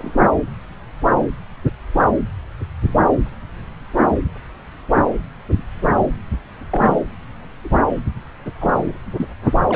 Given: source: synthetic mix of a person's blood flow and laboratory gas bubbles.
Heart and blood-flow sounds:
Doppler ultrasound of blood flow; subclavian vein
0.00-0.10 s: bubbles
6.70-6.98 s: bubbles
7.63-7.69 s: bubbles
8.61-8.74 s: bubbles
9.17-9.26 s: bubbles
9.69-9.76 s: bubbles
From the record:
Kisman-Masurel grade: 122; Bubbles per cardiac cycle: 1 to 2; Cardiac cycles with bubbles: 10 to 50%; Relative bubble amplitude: moderate (0.250 to 0.450); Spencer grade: 2 (many but less than half of the cardiac periods contain bubble signals, singularly or in groups); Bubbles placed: anywhere in the cardiac cycle

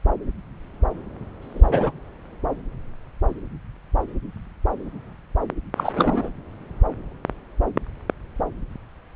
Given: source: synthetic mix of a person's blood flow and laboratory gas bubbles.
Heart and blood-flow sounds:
Doppler ultrasound of blood flow; subclavian vein
1.42-1.92 s: bubbles
5.77-5.92 s: bubbles
5.96-6.29 s: bubbles
From the record:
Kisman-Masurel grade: 222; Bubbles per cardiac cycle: several, 3 to 8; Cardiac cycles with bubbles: 10 to 50%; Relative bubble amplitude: moderate (0.250 to 0.450); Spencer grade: 2 (many but less than half of the cardiac periods contain bubble signals, singularly or in groups); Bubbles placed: anywhere in the cardiac cycle

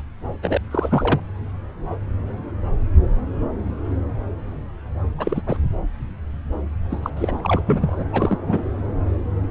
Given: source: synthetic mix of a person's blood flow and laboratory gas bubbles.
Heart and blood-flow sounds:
Doppler ultrasound of blood flow; subclavian vein
0.00-0.02 s: bubbles
0.42-0.58 s: bubbles
0.71-1.20 s: bubbles
5.18-5.42 s: bubbles
5.47-5.57 s: bubbles
6.90-7.10 s: bubbles
7.17-7.61 s: bubbles
7.67-8.05 s: bubbles
8.12-8.38 s: bubbles
8.46-8.62 s: bubbles
From the record:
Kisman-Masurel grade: 232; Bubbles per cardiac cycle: several, 3 to 8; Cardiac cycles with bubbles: 50 to 99%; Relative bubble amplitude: moderate (0.250 to 0.450); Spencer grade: 3 (all of the cardiac periods contain showers or single bubble signals, but not dominating or overriding the cardiac motion signals); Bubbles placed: anywhere in the cardiac cycle

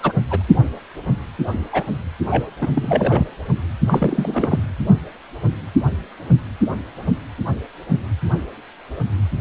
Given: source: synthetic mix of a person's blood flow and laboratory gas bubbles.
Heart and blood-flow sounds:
Doppler ultrasound of blood flow; precordium
0.03-0.12 s: bubbles
0.29-0.43 s: bubbles
1.73-1.83 s: bubbles
2.28-2.52 s: bubbles
2.61-3.27 s: bubbles
3.87-4.67 s: bubbles
From the record:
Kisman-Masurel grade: 222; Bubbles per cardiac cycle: several, 3 to 8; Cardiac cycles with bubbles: 10 to 50%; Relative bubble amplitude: moderate (0.250 to 0.450); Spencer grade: 2 (many but less than half of the cardiac periods contain bubble signals, singularly or in groups); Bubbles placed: anywhere in the cardiac cycle

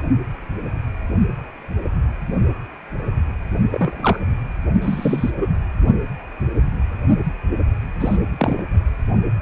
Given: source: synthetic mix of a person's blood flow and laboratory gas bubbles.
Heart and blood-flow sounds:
Doppler ultrasound of blood flow; precordium
3.71-4.20 s: bubbles
4.82-5.31 s: bubbles
5.40-5.48 s: bubbles
8.00-8.17 s: bubbles
8.38-8.63 s: bubbles
From the record:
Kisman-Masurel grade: 123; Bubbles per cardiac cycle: 1 to 2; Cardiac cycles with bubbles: 10 to 50%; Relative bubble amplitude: loud (0.450 to 0.775); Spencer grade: 2 (many but less than half of the cardiac periods contain bubble signals, singularly or in groups); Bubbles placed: only in the low amplitude regions of the cardiac cycle

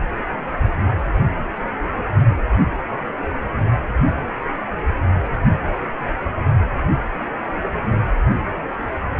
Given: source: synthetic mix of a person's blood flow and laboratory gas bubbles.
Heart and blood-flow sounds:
Doppler ultrasound of blood flow; precordium
no bubbles
From the record:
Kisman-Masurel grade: 000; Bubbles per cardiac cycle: 0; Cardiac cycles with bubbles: 0%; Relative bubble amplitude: no bubbles discernible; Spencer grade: 0 (complete lack of bubble signals)

